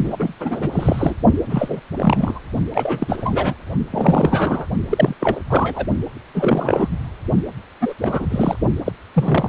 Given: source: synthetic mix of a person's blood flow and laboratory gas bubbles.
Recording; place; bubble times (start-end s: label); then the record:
Doppler ultrasound of blood flow; precordium
0.04-0.16 s: bubbles
0.19-0.34 s: bubbles
0.40-1.16 s: bubbles
1.49-1.80 s: bubbles
1.96-2.40 s: bubbles
2.73-3.54 s: bubbles
3.90-4.66 s: bubbles
4.89-5.14 s: bubbles
5.20-5.40 s: bubbles
5.49-5.86 s: bubbles
6.34-6.88 s: bubbles
7.80-7.94 s: bubbles
8.02-8.27 s: bubbles
8.30-8.57 s: bubbles
8.86-8.92 s: bubbles
9.14-9.49 s: bubbles
From the record:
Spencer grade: 3 (all of the cardiac periods contain showers or single bubble signals, but not dominating or overriding the cardiac motion signals); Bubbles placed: only in the low amplitude regions of the cardiac cycle